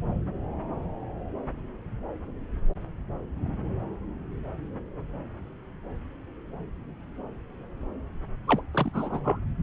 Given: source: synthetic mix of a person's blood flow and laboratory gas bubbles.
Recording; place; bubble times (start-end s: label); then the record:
Doppler ultrasound of blood flow; subclavian vein
8.48-8.61 s: bubbles
8.74-8.91 s: bubbles
8.94-9.20 s: bubbles
9.24-9.40 s: bubbles
From the record:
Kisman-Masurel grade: 211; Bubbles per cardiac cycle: several, 3 to 8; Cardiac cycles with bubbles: 1 to 10%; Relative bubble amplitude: barely perceptible (0.100 to 0.250); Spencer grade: 1 (occasional bubble signal discernible with the cardiac motion signal, with majority of cardiac periods free of bubbles); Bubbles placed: anywhere in the cardiac cycle